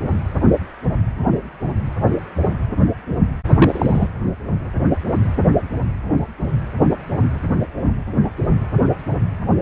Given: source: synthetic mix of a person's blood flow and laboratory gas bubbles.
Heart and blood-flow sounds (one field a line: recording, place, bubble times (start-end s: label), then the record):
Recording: Doppler ultrasound of blood flow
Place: precordium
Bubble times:
3.45-4.08 s: bubbles
From the record:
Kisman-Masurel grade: 212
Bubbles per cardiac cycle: several, 3 to 8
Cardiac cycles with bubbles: 1 to 10%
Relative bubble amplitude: moderate (0.250 to 0.450)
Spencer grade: 1 (occasional bubble signal discernible with the cardiac motion signal, with majority of cardiac periods free of bubbles)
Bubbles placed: anywhere in the cardiac cycle